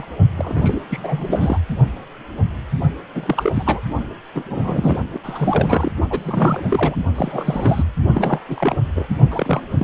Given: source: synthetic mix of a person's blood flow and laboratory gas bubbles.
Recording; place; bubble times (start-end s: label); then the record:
Doppler ultrasound of blood flow; precordium
0.00-0.05 s: bubbles
0.37-0.80 s: bubbles
0.90-1.58 s: bubbles
3.15-3.80 s: bubbles
4.34-4.43 s: bubbles
4.50-4.97 s: bubbles
5.13-5.19 s: bubbles
5.23-5.92 s: bubbles
6.10-6.66 s: bubbles
6.70-6.96 s: bubbles
7.15-7.85 s: bubbles
8.14-8.39 s: bubbles
8.48-8.77 s: bubbles
8.96-9.06 s: bubbles
9.30-9.61 s: bubbles
9.79-9.84 s: bubbles
From the record:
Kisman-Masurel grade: 332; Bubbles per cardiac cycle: rolling drumbeat, 9 or more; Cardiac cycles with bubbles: 50 to 99%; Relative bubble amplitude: moderate (0.250 to 0.450); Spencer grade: 3 (all of the cardiac periods contain showers or single bubble signals, but not dominating or overriding the cardiac motion signals); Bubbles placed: only in the low amplitude regions of the cardiac cycle